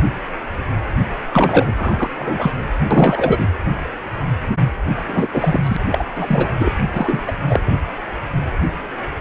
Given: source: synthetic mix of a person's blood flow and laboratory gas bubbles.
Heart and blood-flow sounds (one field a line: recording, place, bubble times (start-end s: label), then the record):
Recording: Doppler ultrasound of blood flow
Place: precordium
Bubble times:
1.32-1.73 s: bubbles
1.76-2.10 s: bubbles
2.19-2.52 s: bubbles
2.90-3.46 s: bubbles
5.08-5.28 s: bubbles
5.33-5.59 s: bubbles
5.63-5.76 s: bubbles
5.91-6.04 s: bubbles
6.15-6.50 s: bubbles
6.59-6.73 s: bubbles
6.94-7.33 s: bubbles
7.49-7.61 s: bubbles
7.66-7.72 s: bubbles
From the record:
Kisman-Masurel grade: 333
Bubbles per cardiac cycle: rolling drumbeat, 9 or more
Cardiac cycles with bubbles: 50 to 99%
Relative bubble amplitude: loud (0.450 to 0.775)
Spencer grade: 3 (all of the cardiac periods contain showers or single bubble signals, but not dominating or overriding the cardiac motion signals)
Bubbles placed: anywhere in the cardiac cycle